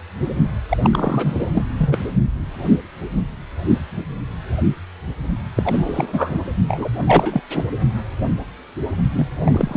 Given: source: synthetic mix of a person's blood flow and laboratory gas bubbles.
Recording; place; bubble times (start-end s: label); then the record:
Doppler ultrasound of blood flow; precordium
0.69-0.77 s: bubbles
0.83-0.90 s: bubbles
0.93-1.51 s: bubbles
1.54-1.64 s: bubbles
1.78-2.02 s: bubbles
5.55-6.39 s: bubbles
6.68-6.89 s: bubbles
7.06-7.42 s: bubbles
7.50-7.64 s: bubbles
9.11-9.26 s: bubbles
9.44-9.77 s: bubbles
From the record:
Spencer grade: 3 (all of the cardiac periods contain showers or single bubble signals, but not dominating or overriding the cardiac motion signals); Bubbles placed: only in the low amplitude regions of the cardiac cycle